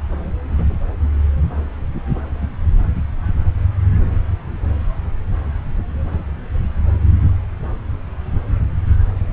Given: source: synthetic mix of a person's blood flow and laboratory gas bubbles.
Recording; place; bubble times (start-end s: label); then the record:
Doppler ultrasound of blood flow; subclavian vein
0.58-0.65 s: bubbles
From the record:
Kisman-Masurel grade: 111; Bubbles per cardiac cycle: 1 to 2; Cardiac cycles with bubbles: 1 to 10%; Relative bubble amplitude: barely perceptible (0.100 to 0.250); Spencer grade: 1 (occasional bubble signal discernible with the cardiac motion signal, with majority of cardiac periods free of bubbles); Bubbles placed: anywhere in the cardiac cycle